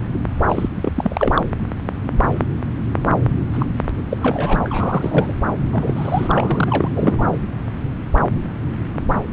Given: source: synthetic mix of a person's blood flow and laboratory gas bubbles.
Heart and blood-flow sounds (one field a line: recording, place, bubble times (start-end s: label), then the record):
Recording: Doppler ultrasound of blood flow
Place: subclavian vein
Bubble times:
0.48-0.68 s: bubbles
0.74-0.92 s: bubbles
0.95-1.44 s: bubbles
3.52-3.65 s: bubbles
4.09-4.17 s: bubbles
4.21-4.56 s: bubbles
4.64-5.34 s: bubbles
5.72-6.88 s: bubbles
6.92-7.28 s: bubbles
From the record:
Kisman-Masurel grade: 332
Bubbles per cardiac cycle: rolling drumbeat, 9 or more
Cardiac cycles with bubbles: 50 to 99%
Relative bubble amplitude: moderate (0.250 to 0.450)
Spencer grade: 3 (all of the cardiac periods contain showers or single bubble signals, but not dominating or overriding the cardiac motion signals)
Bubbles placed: anywhere in the cardiac cycle